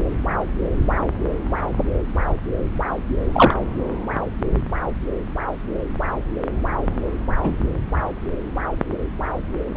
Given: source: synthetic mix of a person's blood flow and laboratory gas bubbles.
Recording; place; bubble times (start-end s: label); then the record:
Doppler ultrasound of blood flow; subclavian vein
3.33-3.54 s: bubbles
7.43-7.58 s: bubbles
From the record:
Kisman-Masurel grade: 123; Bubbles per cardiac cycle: 1 to 2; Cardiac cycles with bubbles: 10 to 50%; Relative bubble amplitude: loud (0.450 to 0.775); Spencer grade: 2 (many but less than half of the cardiac periods contain bubble signals, singularly or in groups); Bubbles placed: anywhere in the cardiac cycle